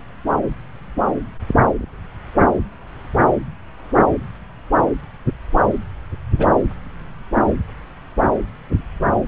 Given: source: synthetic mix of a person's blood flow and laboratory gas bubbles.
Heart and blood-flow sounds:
Doppler ultrasound of blood flow; subclavian vein
6.38-6.48 s: bubbles
From the record:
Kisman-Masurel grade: 112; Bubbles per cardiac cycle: 1 to 2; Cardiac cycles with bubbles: 1 to 10%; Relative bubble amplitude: moderate (0.250 to 0.450); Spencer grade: 1 (occasional bubble signal discernible with the cardiac motion signal, with majority of cardiac periods free of bubbles); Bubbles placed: anywhere in the cardiac cycle

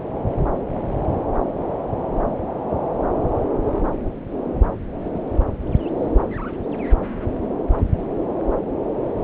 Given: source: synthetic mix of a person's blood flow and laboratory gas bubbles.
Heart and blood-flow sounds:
Doppler ultrasound of blood flow; subclavian vein
5.07-5.24 s: bubbles
From the record:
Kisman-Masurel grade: 111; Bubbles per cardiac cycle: 1 to 2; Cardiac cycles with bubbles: 1 to 10%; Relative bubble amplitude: barely perceptible (0.100 to 0.250); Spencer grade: 1 (occasional bubble signal discernible with the cardiac motion signal, with majority of cardiac periods free of bubbles); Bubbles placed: anywhere in the cardiac cycle

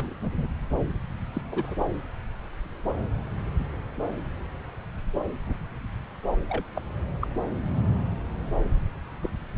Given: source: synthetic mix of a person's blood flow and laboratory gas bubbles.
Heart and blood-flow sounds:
Doppler ultrasound of blood flow; subclavian vein
0.00-0.14 s: bubbles
0.21-0.47 s: bubbles
1.33-1.42 s: bubbles
1.52-1.74 s: bubbles
5.46-5.54 s: bubbles
6.49-6.63 s: bubbles
6.76-6.80 s: bubbles
7.21-7.27 s: bubbles
9.23-9.29 s: bubbles
From the record:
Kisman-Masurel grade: 121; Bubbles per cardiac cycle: 1 to 2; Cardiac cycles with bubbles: 10 to 50%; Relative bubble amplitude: barely perceptible (0.100 to 0.250); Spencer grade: 2 (many but less than half of the cardiac periods contain bubble signals, singularly or in groups); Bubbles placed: anywhere in the cardiac cycle

